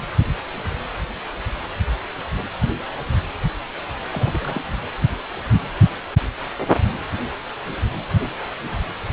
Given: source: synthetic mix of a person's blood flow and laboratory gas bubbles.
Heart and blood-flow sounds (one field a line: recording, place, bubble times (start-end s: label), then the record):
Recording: Doppler ultrasound of blood flow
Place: precordium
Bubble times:
4.12-4.60 s: bubbles
From the record:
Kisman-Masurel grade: 211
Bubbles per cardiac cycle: several, 3 to 8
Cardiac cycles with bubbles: 1 to 10%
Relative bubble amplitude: barely perceptible (0.100 to 0.250)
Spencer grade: 1 (occasional bubble signal discernible with the cardiac motion signal, with majority of cardiac periods free of bubbles)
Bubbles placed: anywhere in the cardiac cycle